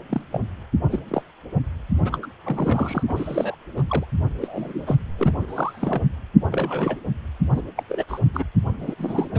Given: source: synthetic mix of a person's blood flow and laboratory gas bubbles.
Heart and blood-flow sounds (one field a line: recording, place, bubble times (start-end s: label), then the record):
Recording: Doppler ultrasound of blood flow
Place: precordium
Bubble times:
0.09-0.21 s: bubbles
0.32-0.41 s: bubbles
0.89-0.99 s: bubbles
1.08-1.23 s: bubbles
2.04-2.18 s: bubbles
2.22-2.26 s: bubbles
2.44-3.03 s: bubbles
3.07-3.55 s: bubbles
3.76-3.83 s: bubbles
3.89-4.05 s: bubbles
4.41-4.96 s: bubbles
5.18-6.02 s: bubbles
6.50-6.97 s: bubbles
7.53-7.62 s: bubbles
7.77-7.83 s: bubbles
7.89-8.04 s: bubbles
8.08-8.21 s: bubbles
8.34-8.44 s: bubbles
8.79-8.95 s: bubbles
8.98-9.29 s: bubbles
9.34-9.39 s: bubbles
From the record:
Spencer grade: 3 (all of the cardiac periods contain showers or single bubble signals, but not dominating or overriding the cardiac motion signals)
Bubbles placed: anywhere in the cardiac cycle